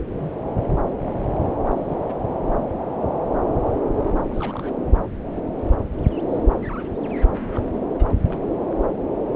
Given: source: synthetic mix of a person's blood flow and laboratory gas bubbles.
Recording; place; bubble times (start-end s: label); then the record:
Doppler ultrasound of blood flow; subclavian vein
0.16-0.30 s: bubbles
0.56-0.68 s: bubbles
1.66-1.95 s: bubbles
2.08-2.13 s: bubbles
4.28-4.76 s: bubbles
7.31-7.68 s: bubbles
7.93-8.04 s: bubbles
8.21-8.49 s: bubbles
From the record:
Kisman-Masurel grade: 221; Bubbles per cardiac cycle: several, 3 to 8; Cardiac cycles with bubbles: 10 to 50%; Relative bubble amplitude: barely perceptible (0.100 to 0.250); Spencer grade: 2 (many but less than half of the cardiac periods contain bubble signals, singularly or in groups); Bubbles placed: anywhere in the cardiac cycle